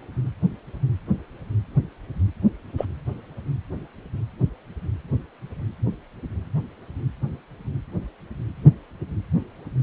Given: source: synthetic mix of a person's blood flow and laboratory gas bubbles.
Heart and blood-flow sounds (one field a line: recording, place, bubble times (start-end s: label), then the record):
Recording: Doppler ultrasound of blood flow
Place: precordium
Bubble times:
2.77-2.85 s: bubbles
From the record:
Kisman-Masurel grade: 112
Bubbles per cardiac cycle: 1 to 2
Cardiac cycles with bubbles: 1 to 10%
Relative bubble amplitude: moderate (0.250 to 0.450)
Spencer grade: 1 (occasional bubble signal discernible with the cardiac motion signal, with majority of cardiac periods free of bubbles)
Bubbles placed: anywhere in the cardiac cycle